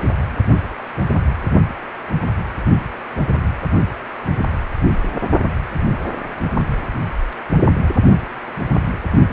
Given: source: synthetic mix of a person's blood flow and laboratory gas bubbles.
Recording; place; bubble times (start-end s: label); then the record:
Doppler ultrasound of blood flow; precordium
no bubbles
From the record:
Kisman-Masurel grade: 000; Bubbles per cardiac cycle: 0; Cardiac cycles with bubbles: 0%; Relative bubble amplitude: no bubbles discernible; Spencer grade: 0 (complete lack of bubble signals)